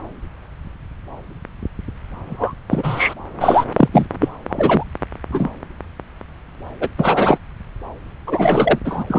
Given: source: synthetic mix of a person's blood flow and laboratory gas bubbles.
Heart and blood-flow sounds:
Doppler ultrasound of blood flow; subclavian vein
2.25-2.54 s: bubbles
2.69-3.14 s: bubbles
3.40-3.66 s: bubbles
3.73-3.88 s: bubbles
3.92-4.07 s: bubbles
4.20-4.29 s: bubbles
4.49-4.84 s: bubbles
5.31-5.49 s: bubbles
6.80-6.89 s: bubbles
6.98-7.38 s: bubbles
8.27-8.79 s: bubbles
8.85-9.04 s: bubbles
9.07-9.19 s: bubbles
From the record:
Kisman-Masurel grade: 233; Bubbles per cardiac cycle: several, 3 to 8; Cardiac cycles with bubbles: 50 to 99%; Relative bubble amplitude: loud (0.450 to 0.775); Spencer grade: 3 (all of the cardiac periods contain showers or single bubble signals, but not dominating or overriding the cardiac motion signals); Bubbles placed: anywhere in the cardiac cycle

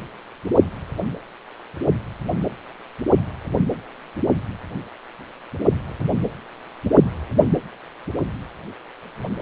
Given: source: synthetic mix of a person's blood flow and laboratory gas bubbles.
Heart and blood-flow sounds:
Doppler ultrasound of blood flow; precordium
no bubbles
From the record:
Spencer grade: 0 (complete lack of bubble signals)

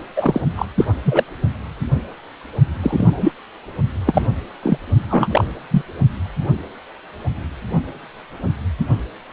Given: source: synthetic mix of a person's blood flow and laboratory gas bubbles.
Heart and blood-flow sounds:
Doppler ultrasound of blood flow; precordium
0.16-0.41 s: bubbles
0.55-0.66 s: bubbles
0.77-0.85 s: bubbles
1.04-1.24 s: bubbles
2.83-3.33 s: bubbles
4.06-4.25 s: bubbles
4.62-4.78 s: bubbles
5.09-5.44 s: bubbles
5.70-5.82 s: bubbles
From the record:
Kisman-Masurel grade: 233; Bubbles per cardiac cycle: several, 3 to 8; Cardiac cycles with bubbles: 50 to 99%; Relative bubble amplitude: loud (0.450 to 0.775); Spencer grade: 3 (all of the cardiac periods contain showers or single bubble signals, but not dominating or overriding the cardiac motion signals); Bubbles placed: only in the low amplitude regions of the cardiac cycle

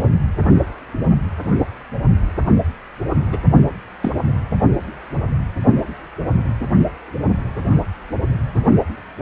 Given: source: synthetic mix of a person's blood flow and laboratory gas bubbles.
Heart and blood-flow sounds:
Doppler ultrasound of blood flow; precordium
3.32-3.38 s: bubbles
4.00-4.12 s: bubbles
From the record:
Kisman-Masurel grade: 122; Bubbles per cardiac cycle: 1 to 2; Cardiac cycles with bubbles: 10 to 50%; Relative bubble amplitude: moderate (0.250 to 0.450); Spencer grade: 2 (many but less than half of the cardiac periods contain bubble signals, singularly or in groups); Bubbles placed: only in the low amplitude regions of the cardiac cycle

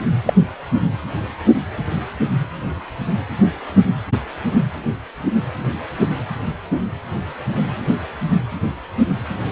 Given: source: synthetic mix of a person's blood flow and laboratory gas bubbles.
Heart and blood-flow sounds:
Doppler ultrasound of blood flow; precordium
0.25-0.34 s: bubbles
From the record:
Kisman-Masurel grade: 113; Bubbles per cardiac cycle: 1 to 2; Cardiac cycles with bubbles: 1 to 10%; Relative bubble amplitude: loud (0.450 to 0.775); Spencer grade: 1 (occasional bubble signal discernible with the cardiac motion signal, with majority of cardiac periods free of bubbles); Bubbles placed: anywhere in the cardiac cycle

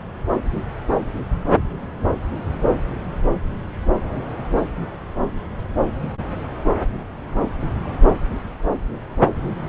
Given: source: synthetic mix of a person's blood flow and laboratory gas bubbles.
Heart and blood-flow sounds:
Doppler ultrasound of blood flow; subclavian vein
no bubbles
From the record:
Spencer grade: 0 (complete lack of bubble signals)

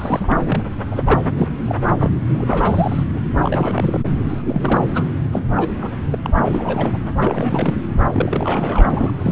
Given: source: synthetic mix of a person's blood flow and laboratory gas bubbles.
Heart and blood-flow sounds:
Doppler ultrasound of blood flow; subclavian vein
0.00-0.62 s: bubbles
0.90-1.19 s: bubbles
1.33-1.48 s: bubbles
1.65-1.75 s: bubbles
1.99-2.12 s: bubbles
2.27-3.04 s: bubbles
3.14-3.21 s: bubbles
3.42-4.00 s: bubbles
4.28-4.85 s: bubbles
4.94-5.03 s: bubbles
5.31-5.42 s: bubbles
5.56-5.90 s: bubbles
6.11-6.18 s: bubbles
6.22-6.32 s: bubbles
6.34-6.97 s: bubbles
7.18-7.83 s: bubbles
8.04-8.08 s: bubbles
8.12-9.32 s: bubbles
From the record:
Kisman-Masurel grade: 332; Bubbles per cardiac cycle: rolling drumbeat, 9 or more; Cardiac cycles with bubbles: 50 to 99%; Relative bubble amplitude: moderate (0.250 to 0.450); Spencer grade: 3 (all of the cardiac periods contain showers or single bubble signals, but not dominating or overriding the cardiac motion signals); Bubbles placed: anywhere in the cardiac cycle

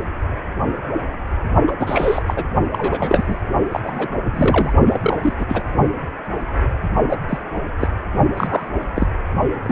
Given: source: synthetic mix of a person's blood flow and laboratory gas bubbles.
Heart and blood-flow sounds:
Doppler ultrasound of blood flow; precordium
1.67-1.72 s: bubbles
1.79-2.22 s: bubbles
2.27-2.44 s: bubbles
2.73-3.40 s: bubbles
3.71-3.80 s: bubbles
3.83-4.08 s: bubbles
4.33-4.73 s: bubbles
4.86-5.33 s: bubbles
5.38-5.45 s: bubbles
5.47-5.63 s: bubbles
7.08-7.17 s: bubbles
7.28-7.38 s: bubbles
7.79-7.88 s: bubbles
8.34-8.69 s: bubbles
8.96-9.07 s: bubbles
9.62-9.72 s: bubbles
From the record:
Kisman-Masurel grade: 232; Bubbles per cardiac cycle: several, 3 to 8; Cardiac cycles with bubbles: 50 to 99%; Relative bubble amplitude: moderate (0.250 to 0.450); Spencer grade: 3 (all of the cardiac periods contain showers or single bubble signals, but not dominating or overriding the cardiac motion signals); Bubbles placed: only in the low amplitude regions of the cardiac cycle

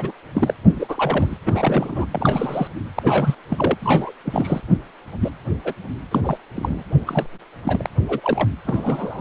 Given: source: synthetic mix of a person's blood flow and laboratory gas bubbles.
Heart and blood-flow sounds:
Doppler ultrasound of blood flow; precordium
0.00-0.11 s: bubbles
0.35-0.53 s: bubbles
0.75-1.37 s: bubbles
1.46-2.06 s: bubbles
2.11-2.68 s: bubbles
2.95-3.35 s: bubbles
3.49-3.77 s: bubbles
3.82-4.12 s: bubbles
4.24-4.61 s: bubbles
5.21-5.30 s: bubbles
5.65-5.74 s: bubbles
6.11-6.21 s: bubbles
6.24-6.38 s: bubbles
6.56-6.83 s: bubbles
7.07-7.26 s: bubbles
7.65-7.86 s: bubbles
8.08-8.21 s: bubbles
8.23-8.50 s: bubbles
8.66-9.21 s: bubbles
From the record:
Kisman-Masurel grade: 242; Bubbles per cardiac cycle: several, 3 to 8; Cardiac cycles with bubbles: 100%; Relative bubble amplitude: moderate (0.250 to 0.450); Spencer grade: 3 (all of the cardiac periods contain showers or single bubble signals, but not dominating or overriding the cardiac motion signals); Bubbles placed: anywhere in the cardiac cycle

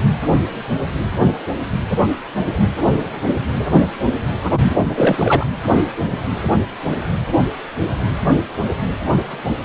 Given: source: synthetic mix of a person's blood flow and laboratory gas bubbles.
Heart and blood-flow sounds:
Doppler ultrasound of blood flow; precordium
4.51-5.46 s: bubbles
From the record:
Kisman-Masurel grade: 213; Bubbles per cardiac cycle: several, 3 to 8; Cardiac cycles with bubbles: 1 to 10%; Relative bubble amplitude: loud (0.450 to 0.775); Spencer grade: 1 (occasional bubble signal discernible with the cardiac motion signal, with majority of cardiac periods free of bubbles); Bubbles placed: anywhere in the cardiac cycle

